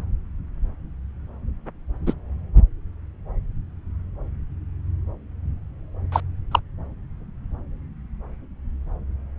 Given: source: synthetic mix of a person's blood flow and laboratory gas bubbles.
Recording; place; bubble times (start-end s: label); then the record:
Doppler ultrasound of blood flow; subclavian vein
2.06-2.13 s: bubbles
6.12-6.21 s: bubbles
6.51-6.59 s: bubbles
From the record:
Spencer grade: 2 (many but less than half of the cardiac periods contain bubble signals, singularly or in groups); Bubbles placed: anywhere in the cardiac cycle